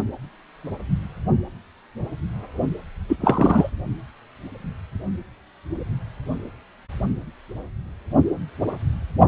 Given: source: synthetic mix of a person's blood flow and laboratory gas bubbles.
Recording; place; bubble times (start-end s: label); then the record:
Doppler ultrasound of blood flow; precordium
3.09-3.17 s: bubbles
3.20-3.69 s: bubbles
From the record:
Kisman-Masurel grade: 213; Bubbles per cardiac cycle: several, 3 to 8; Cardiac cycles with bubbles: 1 to 10%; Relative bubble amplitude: loud (0.450 to 0.775); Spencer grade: 1 (occasional bubble signal discernible with the cardiac motion signal, with majority of cardiac periods free of bubbles); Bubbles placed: only in the low amplitude regions of the cardiac cycle